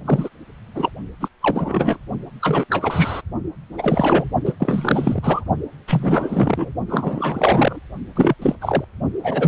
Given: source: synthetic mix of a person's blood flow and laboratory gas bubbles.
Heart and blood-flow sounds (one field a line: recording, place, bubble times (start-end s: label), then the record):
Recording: Doppler ultrasound of blood flow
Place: precordium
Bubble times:
0.05-0.29 s: bubbles
0.75-0.91 s: bubbles
1.21-1.28 s: bubbles
1.41-1.98 s: bubbles
2.41-2.65 s: bubbles
2.70-3.21 s: bubbles
3.78-4.30 s: bubbles
4.45-4.53 s: bubbles
4.59-5.44 s: bubbles
5.88-6.72 s: bubbles
6.88-7.80 s: bubbles
8.15-8.35 s: bubbles
8.42-8.55 s: bubbles
8.61-8.85 s: bubbles
9.23-9.47 s: bubbles
From the record:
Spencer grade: 3 (all of the cardiac periods contain showers or single bubble signals, but not dominating or overriding the cardiac motion signals)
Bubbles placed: only in the low amplitude regions of the cardiac cycle